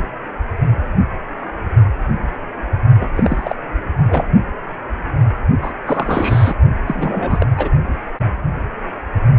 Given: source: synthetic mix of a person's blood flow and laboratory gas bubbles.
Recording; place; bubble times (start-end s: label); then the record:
Doppler ultrasound of blood flow; precordium
3.00-3.08 s: bubbles
3.15-3.56 s: bubbles
3.97-4.28 s: bubbles
5.62-5.72 s: bubbles
5.86-6.55 s: bubbles
6.87-7.46 s: bubbles
7.57-7.69 s: bubbles
From the record:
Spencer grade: 3 (all of the cardiac periods contain showers or single bubble signals, but not dominating or overriding the cardiac motion signals); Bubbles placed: only in the low amplitude regions of the cardiac cycle